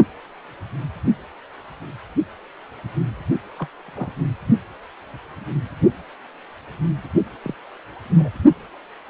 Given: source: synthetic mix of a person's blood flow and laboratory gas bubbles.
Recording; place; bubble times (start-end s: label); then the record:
Doppler ultrasound of blood flow; precordium
3.58-3.67 s: bubbles
3.88-3.90 s: bubbles
3.95-4.12 s: bubbles
7.43-7.55 s: bubbles
8.18-8.30 s: bubbles
From the record:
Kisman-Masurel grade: 121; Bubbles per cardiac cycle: 1 to 2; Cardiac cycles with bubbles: 10 to 50%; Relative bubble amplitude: barely perceptible (0.100 to 0.250); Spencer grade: 2 (many but less than half of the cardiac periods contain bubble signals, singularly or in groups); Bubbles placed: only in the low amplitude regions of the cardiac cycle